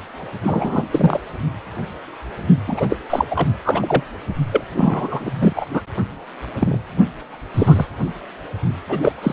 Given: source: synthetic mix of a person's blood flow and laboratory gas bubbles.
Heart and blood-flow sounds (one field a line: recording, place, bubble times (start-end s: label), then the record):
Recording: Doppler ultrasound of blood flow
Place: precordium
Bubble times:
0.43-0.82 s: bubbles
0.91-1.20 s: bubbles
2.68-2.87 s: bubbles
2.89-2.97 s: bubbles
3.10-3.25 s: bubbles
3.31-3.48 s: bubbles
3.65-4.03 s: bubbles
4.52-4.64 s: bubbles
4.75-5.31 s: bubbles
5.41-5.65 s: bubbles
5.73-5.81 s: bubbles
6.60-6.78 s: bubbles
7.54-7.86 s: bubbles
8.88-8.98 s: bubbles
9.01-9.14 s: bubbles
9.22-9.33 s: bubbles
From the record:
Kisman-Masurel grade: 233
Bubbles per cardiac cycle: several, 3 to 8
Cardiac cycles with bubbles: 50 to 99%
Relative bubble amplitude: loud (0.450 to 0.775)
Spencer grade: 3 (all of the cardiac periods contain showers or single bubble signals, but not dominating or overriding the cardiac motion signals)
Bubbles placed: anywhere in the cardiac cycle